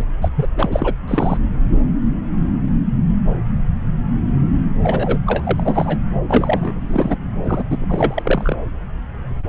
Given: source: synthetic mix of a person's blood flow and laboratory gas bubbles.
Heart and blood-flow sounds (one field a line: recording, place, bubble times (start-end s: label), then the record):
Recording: Doppler ultrasound of blood flow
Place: subclavian vein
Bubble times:
0.00-0.03 s: bubbles
0.21-0.29 s: bubbles
0.35-0.47 s: bubbles
0.57-0.93 s: bubbles
1.08-1.38 s: bubbles
4.83-5.19 s: bubbles
5.25-6.00 s: bubbles
6.28-6.73 s: bubbles
6.79-7.19 s: bubbles
7.44-7.64 s: bubbles
7.69-7.77 s: bubbles
7.80-8.55 s: bubbles
From the record:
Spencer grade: 3 (all of the cardiac periods contain showers or single bubble signals, but not dominating or overriding the cardiac motion signals)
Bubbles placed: anywhere in the cardiac cycle